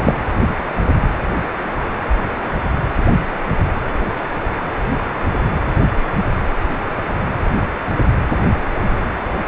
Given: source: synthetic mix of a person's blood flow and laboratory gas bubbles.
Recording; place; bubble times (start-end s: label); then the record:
Doppler ultrasound of blood flow; precordium
0.00-0.14 s: bubbles
From the record:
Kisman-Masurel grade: 213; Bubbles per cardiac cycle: several, 3 to 8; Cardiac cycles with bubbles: 1 to 10%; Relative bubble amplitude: loud (0.450 to 0.775); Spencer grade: 1 (occasional bubble signal discernible with the cardiac motion signal, with majority of cardiac periods free of bubbles); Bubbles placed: anywhere in the cardiac cycle